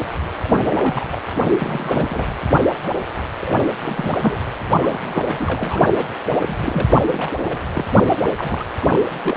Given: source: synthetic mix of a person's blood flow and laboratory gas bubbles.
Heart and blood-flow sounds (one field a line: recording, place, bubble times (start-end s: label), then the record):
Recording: Doppler ultrasound of blood flow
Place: precordium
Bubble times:
0.44-1.06 s: bubbles
1.11-1.19 s: bubbles
1.44-1.57 s: bubbles
1.59-2.26 s: bubbles
3.41-3.67 s: bubbles
3.81-4.37 s: bubbles
4.75-5.92 s: bubbles
5.96-6.07 s: bubbles
6.39-6.99 s: bubbles
7.07-7.32 s: bubbles
7.38-7.58 s: bubbles
7.74-7.85 s: bubbles
8.08-8.30 s: bubbles
8.37-8.64 s: bubbles
8.79-8.99 s: bubbles
9.04-9.37 s: bubbles
From the record:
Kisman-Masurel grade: 332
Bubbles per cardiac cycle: rolling drumbeat, 9 or more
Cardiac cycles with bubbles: 50 to 99%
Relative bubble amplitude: moderate (0.250 to 0.450)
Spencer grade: 3 (all of the cardiac periods contain showers or single bubble signals, but not dominating or overriding the cardiac motion signals)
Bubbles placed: anywhere in the cardiac cycle